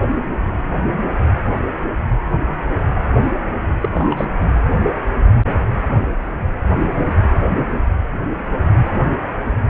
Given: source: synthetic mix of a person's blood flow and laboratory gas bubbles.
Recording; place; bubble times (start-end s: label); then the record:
Doppler ultrasound of blood flow; precordium
3.81-3.89 s: bubbles
3.94-4.25 s: bubbles
4.40-4.49 s: bubbles
From the record:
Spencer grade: 1 (occasional bubble signal discernible with the cardiac motion signal, with majority of cardiac periods free of bubbles); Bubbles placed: anywhere in the cardiac cycle